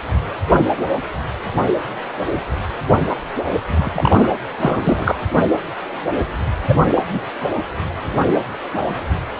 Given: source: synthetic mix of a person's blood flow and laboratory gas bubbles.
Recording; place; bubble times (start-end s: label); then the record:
Doppler ultrasound of blood flow; precordium
3.67-3.90 s: bubbles
3.92-4.29 s: bubbles
4.60-5.21 s: bubbles
6.68-6.75 s: bubbles
6.88-7.20 s: bubbles
From the record:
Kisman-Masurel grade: 223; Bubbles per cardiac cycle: several, 3 to 8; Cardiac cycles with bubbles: 10 to 50%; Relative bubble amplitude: loud (0.450 to 0.775); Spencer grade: 2 (many but less than half of the cardiac periods contain bubble signals, singularly or in groups); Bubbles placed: anywhere in the cardiac cycle